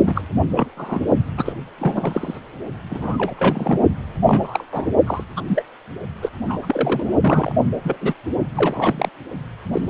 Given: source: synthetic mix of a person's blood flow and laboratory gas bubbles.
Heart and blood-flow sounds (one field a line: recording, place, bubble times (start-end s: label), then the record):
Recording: Doppler ultrasound of blood flow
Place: precordium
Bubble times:
0.02-0.21 s: bubbles
0.49-0.69 s: bubbles
0.77-1.00 s: bubbles
1.37-1.52 s: bubbles
1.78-2.40 s: bubbles
2.91-3.34 s: bubbles
3.38-3.81 s: bubbles
4.27-4.64 s: bubbles
4.71-4.87 s: bubbles
5.07-5.24 s: bubbles
5.37-5.42 s: bubbles
5.48-5.62 s: bubbles
6.21-6.29 s: bubbles
6.45-7.12 s: bubbles
7.21-7.52 s: bubbles
7.83-7.97 s: bubbles
8.01-8.14 s: bubbles
8.55-9.09 s: bubbles
9.72-9.81 s: bubbles
From the record:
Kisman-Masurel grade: 242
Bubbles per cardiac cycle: several, 3 to 8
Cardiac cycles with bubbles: 100%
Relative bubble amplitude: moderate (0.250 to 0.450)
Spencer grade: 3 (all of the cardiac periods contain showers or single bubble signals, but not dominating or overriding the cardiac motion signals)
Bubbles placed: only in the low amplitude regions of the cardiac cycle